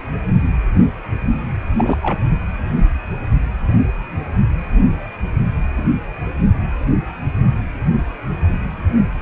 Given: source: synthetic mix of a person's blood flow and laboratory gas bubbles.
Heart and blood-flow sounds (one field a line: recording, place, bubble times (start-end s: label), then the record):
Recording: Doppler ultrasound of blood flow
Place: precordium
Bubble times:
1.77-1.98 s: bubbles
2.02-2.19 s: bubbles
From the record:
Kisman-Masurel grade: 222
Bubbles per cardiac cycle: several, 3 to 8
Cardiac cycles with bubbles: 10 to 50%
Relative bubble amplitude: moderate (0.250 to 0.450)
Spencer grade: 2 (many but less than half of the cardiac periods contain bubble signals, singularly or in groups)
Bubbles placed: anywhere in the cardiac cycle